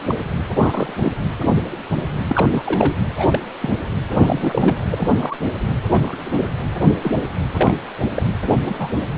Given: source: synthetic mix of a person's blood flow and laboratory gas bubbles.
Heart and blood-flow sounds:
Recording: Doppler ultrasound of blood flow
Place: precordium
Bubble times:
0.07-0.15 s: bubbles
0.59-0.93 s: bubbles
1.03-1.12 s: bubbles
2.29-2.46 s: bubbles
2.51-2.95 s: bubbles
3.18-3.39 s: bubbles
3.62-3.70 s: bubbles
4.16-4.76 s: bubbles
4.90-5.11 s: bubbles
5.17-5.36 s: bubbles
5.91-6.17 s: bubbles
6.35-6.41 s: bubbles
7.02-7.27 s: bubbles
7.56-7.74 s: bubbles
8.14-8.22 s: bubbles
8.62-9.00 s: bubbles
9.08-9.18 s: bubbles
From the record:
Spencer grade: 3 (all of the cardiac periods contain showers or single bubble signals, but not dominating or overriding the cardiac motion signals)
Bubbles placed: anywhere in the cardiac cycle

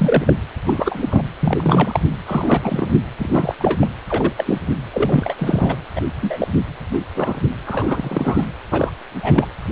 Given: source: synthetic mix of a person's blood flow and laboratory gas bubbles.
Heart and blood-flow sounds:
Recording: Doppler ultrasound of blood flow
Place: precordium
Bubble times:
0.00-0.33 s: bubbles
0.66-1.23 s: bubbles
1.40-2.00 s: bubbles
2.26-2.98 s: bubbles
3.18-3.55 s: bubbles
3.59-3.77 s: bubbles
3.81-3.89 s: bubbles
4.07-4.33 s: bubbles
4.36-4.60 s: bubbles
4.93-5.35 s: bubbles
5.38-5.75 s: bubbles
5.95-6.02 s: bubbles
6.21-6.47 s: bubbles
6.93-6.99 s: bubbles
7.14-7.40 s: bubbles
7.66-8.46 s: bubbles
8.71-8.91 s: bubbles
9.22-9.46 s: bubbles
From the record:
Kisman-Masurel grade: 243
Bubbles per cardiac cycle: several, 3 to 8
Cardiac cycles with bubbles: 100%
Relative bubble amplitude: loud (0.450 to 0.775)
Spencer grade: 3 (all of the cardiac periods contain showers or single bubble signals, but not dominating or overriding the cardiac motion signals)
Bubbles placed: anywhere in the cardiac cycle

